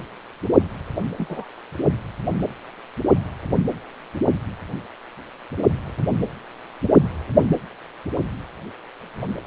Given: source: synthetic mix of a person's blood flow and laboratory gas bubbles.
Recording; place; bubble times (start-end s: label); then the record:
Doppler ultrasound of blood flow; precordium
1.18-1.45 s: bubbles
From the record:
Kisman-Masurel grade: 111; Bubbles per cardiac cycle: 1 to 2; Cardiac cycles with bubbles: 1 to 10%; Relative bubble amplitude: barely perceptible (0.100 to 0.250); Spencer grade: 1 (occasional bubble signal discernible with the cardiac motion signal, with majority of cardiac periods free of bubbles); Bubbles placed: anywhere in the cardiac cycle